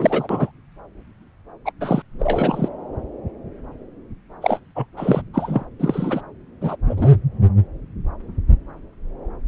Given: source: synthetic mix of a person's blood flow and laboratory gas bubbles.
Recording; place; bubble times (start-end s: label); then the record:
Doppler ultrasound of blood flow; subclavian vein
0.00-0.51 s: bubbles
1.65-1.71 s: bubbles
1.80-2.02 s: bubbles
2.19-2.69 s: bubbles
4.42-4.59 s: bubbles
4.75-4.86 s: bubbles
4.97-5.22 s: bubbles
5.33-5.66 s: bubbles
5.79-6.21 s: bubbles
6.61-6.77 s: bubbles
6.88-7.08 s: bubbles
From the record:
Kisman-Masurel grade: 233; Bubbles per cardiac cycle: several, 3 to 8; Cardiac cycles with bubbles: 50 to 99%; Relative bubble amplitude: loud (0.450 to 0.775); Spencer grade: 3 (all of the cardiac periods contain showers or single bubble signals, but not dominating or overriding the cardiac motion signals); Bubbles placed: anywhere in the cardiac cycle